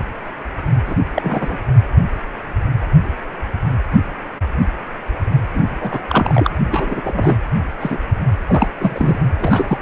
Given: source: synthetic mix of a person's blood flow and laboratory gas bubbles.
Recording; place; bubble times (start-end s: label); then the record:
Doppler ultrasound of blood flow; precordium
0.86-0.95 s: bubbles
1.14-1.57 s: bubbles
5.48-6.00 s: bubbles
6.07-6.50 s: bubbles
6.70-7.39 s: bubbles
7.80-7.97 s: bubbles
8.47-8.68 s: bubbles
8.79-9.19 s: bubbles
9.40-9.78 s: bubbles
From the record:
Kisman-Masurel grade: 233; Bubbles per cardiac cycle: several, 3 to 8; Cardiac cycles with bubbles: 50 to 99%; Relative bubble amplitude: loud (0.450 to 0.775); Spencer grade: 3 (all of the cardiac periods contain showers or single bubble signals, but not dominating or overriding the cardiac motion signals); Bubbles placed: only in the low amplitude regions of the cardiac cycle